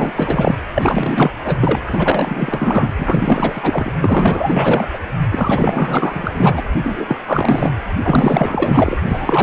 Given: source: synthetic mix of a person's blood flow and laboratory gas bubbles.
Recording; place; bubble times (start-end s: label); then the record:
Doppler ultrasound of blood flow; precordium
0.00-0.12 s: bubbles
0.17-0.56 s: bubbles
0.74-1.32 s: bubbles
1.43-1.80 s: bubbles
1.86-2.92 s: bubbles
2.97-3.92 s: bubbles
4.00-4.87 s: bubbles
4.93-4.99 s: bubbles
5.30-6.63 s: bubbles
6.78-7.16 s: bubbles
7.27-7.72 s: bubbles
8.04-8.97 s: bubbles
9.06-9.43 s: bubbles
From the record:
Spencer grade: 4 (maximum detectable bubble signal sounding continuously throughout systole and diastole of every cardiac period, and overriding the amplitude of the normal cardiac signals); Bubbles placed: anywhere in the cardiac cycle